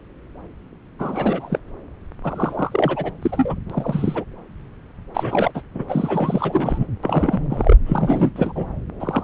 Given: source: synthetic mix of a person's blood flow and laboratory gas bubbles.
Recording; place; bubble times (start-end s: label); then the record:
Doppler ultrasound of blood flow; subclavian vein
0.99-1.59 s: bubbles
2.23-3.12 s: bubbles
3.21-3.59 s: bubbles
3.70-4.23 s: bubbles
5.14-5.51 s: bubbles
5.54-5.61 s: bubbles
5.74-5.84 s: bubbles
5.89-6.86 s: bubbles
7.03-7.42 s: bubbles
7.50-7.76 s: bubbles
7.87-8.33 s: bubbles
8.36-8.67 s: bubbles
9.00-9.24 s: bubbles
From the record:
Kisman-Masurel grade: 332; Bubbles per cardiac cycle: rolling drumbeat, 9 or more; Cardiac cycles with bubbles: 50 to 99%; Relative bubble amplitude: moderate (0.250 to 0.450); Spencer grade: 3 (all of the cardiac periods contain showers or single bubble signals, but not dominating or overriding the cardiac motion signals); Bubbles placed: anywhere in the cardiac cycle